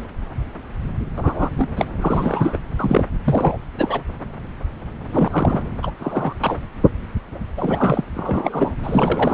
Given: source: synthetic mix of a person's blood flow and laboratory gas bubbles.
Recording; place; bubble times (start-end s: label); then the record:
Doppler ultrasound of blood flow; subclavian vein
1.17-1.49 s: bubbles
1.57-1.69 s: bubbles
1.76-1.85 s: bubbles
2.00-2.57 s: bubbles
2.79-3.04 s: bubbles
3.25-3.58 s: bubbles
3.78-4.01 s: bubbles
5.12-5.62 s: bubbles
5.83-5.91 s: bubbles
5.99-6.33 s: bubbles
6.41-6.58 s: bubbles
7.57-8.03 s: bubbles
8.14-8.75 s: bubbles
8.83-9.34 s: bubbles
From the record:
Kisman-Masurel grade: 232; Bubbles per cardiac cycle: several, 3 to 8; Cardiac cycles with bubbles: 50 to 99%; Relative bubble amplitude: moderate (0.250 to 0.450); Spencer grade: 3 (all of the cardiac periods contain showers or single bubble signals, but not dominating or overriding the cardiac motion signals); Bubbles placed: anywhere in the cardiac cycle